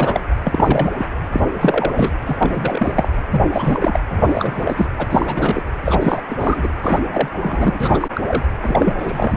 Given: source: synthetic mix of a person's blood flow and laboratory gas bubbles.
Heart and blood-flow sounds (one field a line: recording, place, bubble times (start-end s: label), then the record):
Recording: Doppler ultrasound of blood flow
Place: precordium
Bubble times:
0.00-0.21 s: bubbles
0.45-0.91 s: bubbles
0.98-1.05 s: bubbles
1.33-1.40 s: bubbles
1.60-2.10 s: bubbles
2.25-2.35 s: bubbles
2.39-3.08 s: bubbles
3.30-3.42 s: bubbles
3.51-3.99 s: bubbles
4.08-4.18 s: bubbles
4.21-4.86 s: bubbles
4.98-5.08 s: bubbles
5.10-5.62 s: bubbles
5.85-5.98 s: bubbles
6.01-6.22 s: bubbles
6.29-6.69 s: bubbles
6.83-7.01 s: bubbles
7.12-7.29 s: bubbles
7.39-8.08 s: bubbles
8.13-8.22 s: bubbles
8.27-8.45 s: bubbles
8.62-8.93 s: bubbles
8.97-9.37 s: bubbles
From the record:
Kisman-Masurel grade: 342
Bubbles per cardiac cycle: rolling drumbeat, 9 or more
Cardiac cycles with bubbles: 100%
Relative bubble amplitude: moderate (0.250 to 0.450)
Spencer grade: 3 (all of the cardiac periods contain showers or single bubble signals, but not dominating or overriding the cardiac motion signals)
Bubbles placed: anywhere in the cardiac cycle